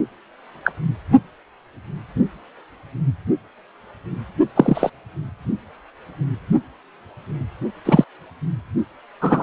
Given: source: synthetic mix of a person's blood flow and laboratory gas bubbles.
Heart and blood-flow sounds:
Doppler ultrasound of blood flow; precordium
0.64-0.72 s: bubbles
4.56-4.90 s: bubbles
7.85-8.04 s: bubbles
9.21-9.43 s: bubbles
From the record:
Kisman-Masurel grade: 123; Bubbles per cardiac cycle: 1 to 2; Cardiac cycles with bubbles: 10 to 50%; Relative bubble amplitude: loud (0.450 to 0.775); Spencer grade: 2 (many but less than half of the cardiac periods contain bubble signals, singularly or in groups); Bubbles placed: only in the low amplitude regions of the cardiac cycle

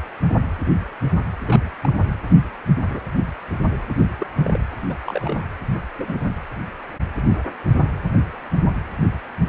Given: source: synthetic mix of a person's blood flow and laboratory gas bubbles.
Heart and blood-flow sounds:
Doppler ultrasound of blood flow; precordium
1.46-1.60 s: bubbles
1.83-1.93 s: bubbles
2.90-3.00 s: bubbles
4.19-4.27 s: bubbles
4.44-4.58 s: bubbles
4.90-4.94 s: bubbles
5.07-5.44 s: bubbles
5.97-6.15 s: bubbles
From the record:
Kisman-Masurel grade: 121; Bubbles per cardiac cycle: 1 to 2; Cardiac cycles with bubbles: 10 to 50%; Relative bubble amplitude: barely perceptible (0.100 to 0.250); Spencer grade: 2 (many but less than half of the cardiac periods contain bubble signals, singularly or in groups); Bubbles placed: anywhere in the cardiac cycle

